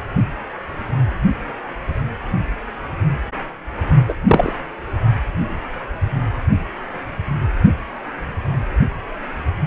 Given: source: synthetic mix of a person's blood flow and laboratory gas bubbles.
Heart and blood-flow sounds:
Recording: Doppler ultrasound of blood flow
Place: precordium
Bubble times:
4.08-4.13 s: bubbles
4.28-4.53 s: bubbles
From the record:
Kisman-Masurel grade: 113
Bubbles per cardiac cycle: 1 to 2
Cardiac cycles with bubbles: 1 to 10%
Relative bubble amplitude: loud (0.450 to 0.775)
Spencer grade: 1 (occasional bubble signal discernible with the cardiac motion signal, with majority of cardiac periods free of bubbles)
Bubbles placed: only in the low amplitude regions of the cardiac cycle

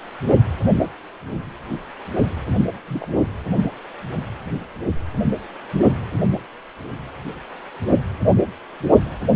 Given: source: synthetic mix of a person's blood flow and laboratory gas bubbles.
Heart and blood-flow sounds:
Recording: Doppler ultrasound of blood flow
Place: precordium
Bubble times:
2.87-3.08 s: bubbles
From the record:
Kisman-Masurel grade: 111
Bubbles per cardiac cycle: 1 to 2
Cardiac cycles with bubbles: 1 to 10%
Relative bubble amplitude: barely perceptible (0.100 to 0.250)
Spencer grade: 1 (occasional bubble signal discernible with the cardiac motion signal, with majority of cardiac periods free of bubbles)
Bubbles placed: only in the low amplitude regions of the cardiac cycle

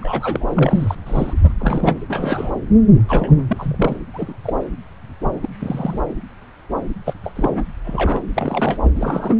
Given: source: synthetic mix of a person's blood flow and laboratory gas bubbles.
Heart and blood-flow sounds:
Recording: Doppler ultrasound of blood flow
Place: subclavian vein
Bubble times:
0.01-0.95 s: bubbles
1.06-1.33 s: bubbles
1.43-1.52 s: bubbles
1.60-1.98 s: bubbles
2.08-2.52 s: bubbles
3.08-3.40 s: bubbles
3.48-3.94 s: bubbles
4.13-4.33 s: bubbles
4.43-4.53 s: bubbles
5.42-5.49 s: bubbles
5.60-6.00 s: bubbles
7.05-7.13 s: bubbles
7.24-7.62 s: bubbles
7.84-8.22 s: bubbles
8.33-8.79 s: bubbles
8.82-8.90 s: bubbles
8.95-9.36 s: bubbles
From the record:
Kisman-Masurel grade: 232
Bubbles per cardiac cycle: several, 3 to 8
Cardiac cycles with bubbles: 50 to 99%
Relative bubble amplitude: moderate (0.250 to 0.450)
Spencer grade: 3 (all of the cardiac periods contain showers or single bubble signals, but not dominating or overriding the cardiac motion signals)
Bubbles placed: anywhere in the cardiac cycle

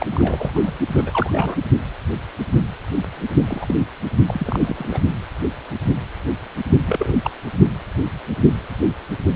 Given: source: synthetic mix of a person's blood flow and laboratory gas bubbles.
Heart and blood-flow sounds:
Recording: Doppler ultrasound of blood flow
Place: precordium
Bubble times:
0.00-0.07 s: bubbles
0.11-0.51 s: bubbles
0.54-0.72 s: bubbles
0.93-1.55 s: bubbles
3.47-3.75 s: bubbles
4.26-4.99 s: bubbles
6.85-7.14 s: bubbles
7.24-7.31 s: bubbles
From the record:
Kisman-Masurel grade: 222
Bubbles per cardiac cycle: several, 3 to 8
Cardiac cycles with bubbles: 10 to 50%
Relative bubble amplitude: moderate (0.250 to 0.450)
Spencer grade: 2 (many but less than half of the cardiac periods contain bubble signals, singularly or in groups)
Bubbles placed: only in the low amplitude regions of the cardiac cycle

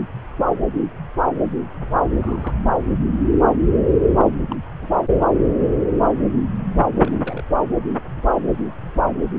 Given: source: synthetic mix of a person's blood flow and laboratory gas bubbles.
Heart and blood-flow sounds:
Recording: Doppler ultrasound of blood flow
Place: subclavian vein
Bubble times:
2.20-2.54 s: bubbles
4.17-4.25 s: bubbles
4.50-4.56 s: bubbles
4.82-4.87 s: bubbles
5.20-5.26 s: bubbles
7.04-7.44 s: bubbles
From the record:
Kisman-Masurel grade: 121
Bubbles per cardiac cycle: 1 to 2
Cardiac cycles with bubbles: 10 to 50%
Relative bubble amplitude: barely perceptible (0.100 to 0.250)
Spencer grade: 2 (many but less than half of the cardiac periods contain bubble signals, singularly or in groups)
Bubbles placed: anywhere in the cardiac cycle

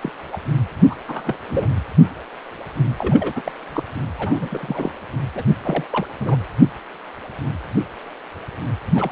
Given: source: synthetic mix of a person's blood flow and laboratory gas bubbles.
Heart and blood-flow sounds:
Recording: Doppler ultrasound of blood flow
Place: precordium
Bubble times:
0.03-0.12 s: bubbles
0.32-0.40 s: bubbles
0.81-0.84 s: bubbles
0.90-0.96 s: bubbles
1.06-1.36 s: bubbles
1.48-1.68 s: bubbles
2.97-3.33 s: bubbles
3.36-3.42 s: bubbles
3.44-3.51 s: bubbles
3.74-3.83 s: bubbles
4.18-4.92 s: bubbles
5.35-5.43 s: bubbles
5.64-5.85 s: bubbles
5.91-6.07 s: bubbles
6.20-6.37 s: bubbles
8.94-9.12 s: bubbles
From the record:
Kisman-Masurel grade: 232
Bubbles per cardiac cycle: several, 3 to 8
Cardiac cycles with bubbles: 50 to 99%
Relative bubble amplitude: moderate (0.250 to 0.450)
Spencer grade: 3 (all of the cardiac periods contain showers or single bubble signals, but not dominating or overriding the cardiac motion signals)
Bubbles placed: anywhere in the cardiac cycle

